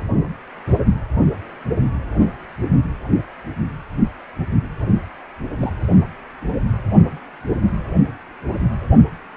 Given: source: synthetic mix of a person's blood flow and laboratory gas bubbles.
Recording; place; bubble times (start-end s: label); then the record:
Doppler ultrasound of blood flow; precordium
5.58-5.73 s: bubbles
From the record:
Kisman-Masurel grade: 111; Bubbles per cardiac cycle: 1 to 2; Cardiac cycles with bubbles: 1 to 10%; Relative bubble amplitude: barely perceptible (0.100 to 0.250); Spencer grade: 1 (occasional bubble signal discernible with the cardiac motion signal, with majority of cardiac periods free of bubbles); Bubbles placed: anywhere in the cardiac cycle